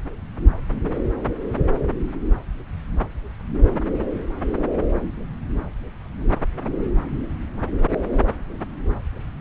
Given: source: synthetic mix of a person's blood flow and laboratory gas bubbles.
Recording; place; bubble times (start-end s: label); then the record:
Doppler ultrasound of blood flow; subclavian vein
no bubbles
From the record:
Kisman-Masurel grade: 000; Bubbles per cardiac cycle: 0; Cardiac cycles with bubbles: 0%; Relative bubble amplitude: no bubbles discernible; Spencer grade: 0 (complete lack of bubble signals)